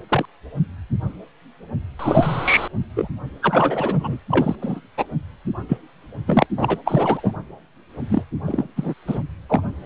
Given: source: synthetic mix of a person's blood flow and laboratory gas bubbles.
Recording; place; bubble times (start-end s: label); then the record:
Doppler ultrasound of blood flow; precordium
0.09-0.26 s: bubbles
1.99-2.68 s: bubbles
2.96-3.08 s: bubbles
3.42-4.17 s: bubbles
4.30-4.56 s: bubbles
4.62-4.81 s: bubbles
4.97-5.04 s: bubbles
5.68-5.77 s: bubbles
6.27-6.46 s: bubbles
6.57-6.79 s: bubbles
6.84-7.32 s: bubbles
8.09-8.23 s: bubbles
8.46-8.68 s: bubbles
8.76-8.94 s: bubbles
9.06-9.19 s: bubbles
9.49-9.62 s: bubbles
From the record:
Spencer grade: 3 (all of the cardiac periods contain showers or single bubble signals, but not dominating or overriding the cardiac motion signals); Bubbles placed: anywhere in the cardiac cycle